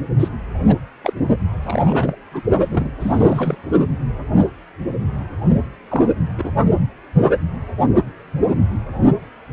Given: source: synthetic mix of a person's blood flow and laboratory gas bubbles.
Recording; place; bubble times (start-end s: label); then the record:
Doppler ultrasound of blood flow; precordium
0.20-0.28 s: bubbles
0.68-0.75 s: bubbles
1.04-1.13 s: bubbles
1.62-2.16 s: bubbles
2.31-2.42 s: bubbles
2.70-2.91 s: bubbles
3.00-3.56 s: bubbles
5.49-5.62 s: bubbles
5.90-6.10 s: bubbles
6.38-6.52 s: bubbles
From the record:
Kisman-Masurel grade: 232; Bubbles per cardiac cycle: several, 3 to 8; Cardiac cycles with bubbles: 50 to 99%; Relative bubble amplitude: moderate (0.250 to 0.450); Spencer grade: 3 (all of the cardiac periods contain showers or single bubble signals, but not dominating or overriding the cardiac motion signals); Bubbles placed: only in the low amplitude regions of the cardiac cycle